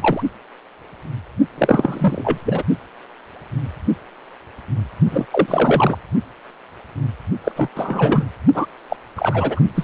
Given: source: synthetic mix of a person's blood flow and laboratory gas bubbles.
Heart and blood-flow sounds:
Doppler ultrasound of blood flow; precordium
0.00-0.21 s: bubbles
1.57-2.40 s: bubbles
2.45-2.64 s: bubbles
5.10-5.26 s: bubbles
5.31-5.98 s: bubbles
7.43-7.52 s: bubbles
7.55-7.69 s: bubbles
7.75-8.25 s: bubbles
8.54-8.66 s: bubbles
8.89-8.97 s: bubbles
9.16-9.61 s: bubbles
9.75-9.84 s: bubbles
From the record:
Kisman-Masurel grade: 333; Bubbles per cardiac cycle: rolling drumbeat, 9 or more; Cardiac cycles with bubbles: 50 to 99%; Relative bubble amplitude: loud (0.450 to 0.775); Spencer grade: 3 (all of the cardiac periods contain showers or single bubble signals, but not dominating or overriding the cardiac motion signals); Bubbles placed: only in the low amplitude regions of the cardiac cycle

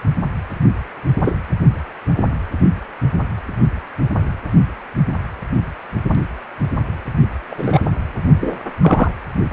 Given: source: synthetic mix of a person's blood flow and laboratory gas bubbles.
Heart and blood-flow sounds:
Doppler ultrasound of blood flow; precordium
1.23-1.32 s: bubbles
7.49-7.88 s: bubbles
8.40-8.58 s: bubbles
8.81-9.11 s: bubbles
From the record:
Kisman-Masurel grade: 123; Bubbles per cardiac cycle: 1 to 2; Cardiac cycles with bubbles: 10 to 50%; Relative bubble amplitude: loud (0.450 to 0.775); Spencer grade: 2 (many but less than half of the cardiac periods contain bubble signals, singularly or in groups); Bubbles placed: only in the low amplitude regions of the cardiac cycle

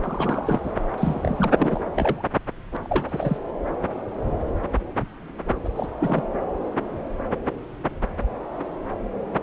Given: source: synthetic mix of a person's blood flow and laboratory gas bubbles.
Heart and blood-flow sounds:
Doppler ultrasound of blood flow; subclavian vein
0.02-0.60 s: bubbles
0.64-0.71 s: bubbles
0.98-1.51 s: bubbles
1.57-1.80 s: bubbles
1.95-2.27 s: bubbles
2.72-2.77 s: bubbles
2.83-3.38 s: bubbles
5.64-5.68 s: bubbles
5.75-5.87 s: bubbles
6.00-6.24 s: bubbles
From the record:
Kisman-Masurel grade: 221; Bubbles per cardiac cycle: several, 3 to 8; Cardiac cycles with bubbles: 10 to 50%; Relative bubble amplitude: barely perceptible (0.100 to 0.250); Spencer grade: 2 (many but less than half of the cardiac periods contain bubble signals, singularly or in groups); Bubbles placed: anywhere in the cardiac cycle

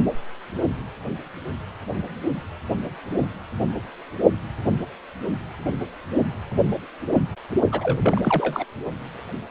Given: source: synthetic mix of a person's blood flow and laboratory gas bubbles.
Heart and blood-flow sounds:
Doppler ultrasound of blood flow; precordium
7.71-8.64 s: bubbles
From the record:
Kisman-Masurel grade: 212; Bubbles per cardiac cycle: several, 3 to 8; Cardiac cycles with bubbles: 1 to 10%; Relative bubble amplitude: moderate (0.250 to 0.450); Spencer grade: 1 (occasional bubble signal discernible with the cardiac motion signal, with majority of cardiac periods free of bubbles); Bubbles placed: only in the low amplitude regions of the cardiac cycle

